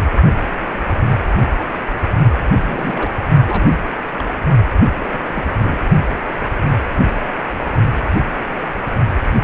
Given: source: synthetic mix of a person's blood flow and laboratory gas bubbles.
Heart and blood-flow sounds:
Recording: Doppler ultrasound of blood flow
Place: precordium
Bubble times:
2.67-3.10 s: bubbles
3.45-3.80 s: bubbles
4.18-4.23 s: bubbles
5.00-5.17 s: bubbles
5.21-5.43 s: bubbles
5.64-5.79 s: bubbles
From the record:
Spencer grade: 2 (many but less than half of the cardiac periods contain bubble signals, singularly or in groups)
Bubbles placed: only in the low amplitude regions of the cardiac cycle

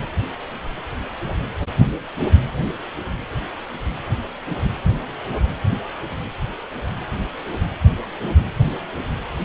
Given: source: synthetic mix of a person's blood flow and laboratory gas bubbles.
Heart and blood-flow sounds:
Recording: Doppler ultrasound of blood flow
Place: precordium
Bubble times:
no bubbles
From the record:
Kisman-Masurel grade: 000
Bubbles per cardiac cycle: 0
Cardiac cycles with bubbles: 0%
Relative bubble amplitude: no bubbles discernible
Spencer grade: 0 (complete lack of bubble signals)

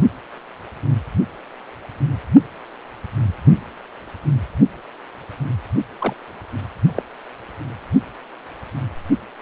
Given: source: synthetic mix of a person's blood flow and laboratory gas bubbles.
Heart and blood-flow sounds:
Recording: Doppler ultrasound of blood flow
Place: precordium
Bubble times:
5.99-6.13 s: bubbles
6.95-7.03 s: bubbles
From the record:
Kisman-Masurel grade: 112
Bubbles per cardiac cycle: 1 to 2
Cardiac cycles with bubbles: 1 to 10%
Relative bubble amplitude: moderate (0.250 to 0.450)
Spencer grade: 1 (occasional bubble signal discernible with the cardiac motion signal, with majority of cardiac periods free of bubbles)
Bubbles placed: only in the low amplitude regions of the cardiac cycle

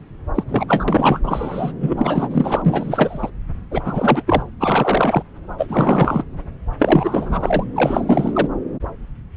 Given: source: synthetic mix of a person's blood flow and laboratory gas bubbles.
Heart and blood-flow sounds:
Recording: Doppler ultrasound of blood flow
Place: subclavian vein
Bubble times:
0.35-0.43 s: bubbles
0.48-0.66 s: bubbles
0.68-0.85 s: bubbles
0.88-1.20 s: bubbles
1.23-1.72 s: bubbles
1.80-2.62 s: bubbles
2.64-3.30 s: bubbles
3.71-3.81 s: bubbles
3.84-4.23 s: bubbles
4.27-4.42 s: bubbles
4.60-5.23 s: bubbles
5.58-6.24 s: bubbles
6.79-7.64 s: bubbles
7.75-8.48 s: bubbles
From the record:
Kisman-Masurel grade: 333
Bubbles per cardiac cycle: rolling drumbeat, 9 or more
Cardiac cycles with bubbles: 50 to 99%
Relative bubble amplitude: loud (0.450 to 0.775)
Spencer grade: 3 (all of the cardiac periods contain showers or single bubble signals, but not dominating or overriding the cardiac motion signals)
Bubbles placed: anywhere in the cardiac cycle

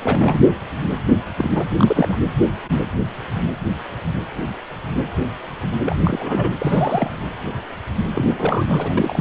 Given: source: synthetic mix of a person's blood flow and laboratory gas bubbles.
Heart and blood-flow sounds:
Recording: Doppler ultrasound of blood flow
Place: precordium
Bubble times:
0.02-0.39 s: bubbles
1.38-1.51 s: bubbles
1.54-1.68 s: bubbles
1.77-2.19 s: bubbles
5.85-5.99 s: bubbles
6.04-6.52 s: bubbles
6.58-7.16 s: bubbles
8.14-8.93 s: bubbles
8.97-9.21 s: bubbles
From the record:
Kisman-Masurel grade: 332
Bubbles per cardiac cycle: rolling drumbeat, 9 or more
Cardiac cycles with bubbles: 50 to 99%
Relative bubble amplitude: moderate (0.250 to 0.450)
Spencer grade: 3 (all of the cardiac periods contain showers or single bubble signals, but not dominating or overriding the cardiac motion signals)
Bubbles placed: anywhere in the cardiac cycle

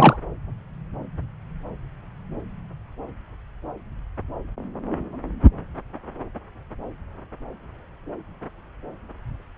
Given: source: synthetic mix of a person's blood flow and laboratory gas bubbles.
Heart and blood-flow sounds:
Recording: Doppler ultrasound of blood flow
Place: subclavian vein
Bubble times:
0.00-0.17 s: bubbles
From the record:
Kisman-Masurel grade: 213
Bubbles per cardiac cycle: several, 3 to 8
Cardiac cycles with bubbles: 1 to 10%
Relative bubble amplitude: loud (0.450 to 0.775)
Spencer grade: 1 (occasional bubble signal discernible with the cardiac motion signal, with majority of cardiac periods free of bubbles)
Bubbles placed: anywhere in the cardiac cycle

